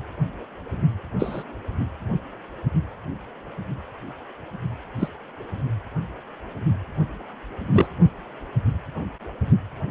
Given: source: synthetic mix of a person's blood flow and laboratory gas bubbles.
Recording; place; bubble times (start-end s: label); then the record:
Doppler ultrasound of blood flow; precordium
1.19-1.44 s: bubbles
4.99-5.08 s: bubbles
7.72-7.87 s: bubbles
From the record:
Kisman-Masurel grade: 122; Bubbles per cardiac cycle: 1 to 2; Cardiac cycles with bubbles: 10 to 50%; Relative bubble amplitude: moderate (0.250 to 0.450); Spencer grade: 2 (many but less than half of the cardiac periods contain bubble signals, singularly or in groups); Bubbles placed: only in the low amplitude regions of the cardiac cycle